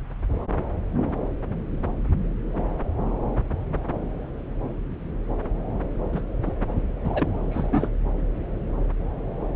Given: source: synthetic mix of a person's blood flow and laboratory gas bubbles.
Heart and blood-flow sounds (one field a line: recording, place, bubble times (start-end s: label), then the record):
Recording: Doppler ultrasound of blood flow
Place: subclavian vein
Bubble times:
6.12-6.21 s: bubbles
6.46-6.52 s: bubbles
7.04-7.89 s: bubbles
From the record:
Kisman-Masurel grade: 212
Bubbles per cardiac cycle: several, 3 to 8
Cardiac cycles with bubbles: 1 to 10%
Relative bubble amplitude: moderate (0.250 to 0.450)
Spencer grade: 1 (occasional bubble signal discernible with the cardiac motion signal, with majority of cardiac periods free of bubbles)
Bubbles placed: anywhere in the cardiac cycle